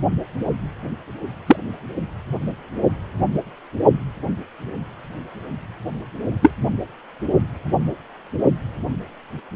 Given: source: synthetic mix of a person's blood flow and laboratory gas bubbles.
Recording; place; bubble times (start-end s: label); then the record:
Doppler ultrasound of blood flow; precordium
1.46-1.56 s: bubbles
6.42-6.51 s: bubbles
From the record:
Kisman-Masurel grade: 123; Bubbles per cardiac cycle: 1 to 2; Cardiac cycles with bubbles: 10 to 50%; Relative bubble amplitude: loud (0.450 to 0.775); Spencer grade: 2 (many but less than half of the cardiac periods contain bubble signals, singularly or in groups); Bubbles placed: only in the low amplitude regions of the cardiac cycle